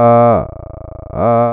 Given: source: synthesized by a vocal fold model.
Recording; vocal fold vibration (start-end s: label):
sustained vowel that changes in the middle
0.00-0.29 s: 118.0 Hz, open quotient 0.45
0.49-1.09 s: 27.9 Hz, open quotient 0.26
1.29-1.53 s: 118.0 Hz, open quotient 0.45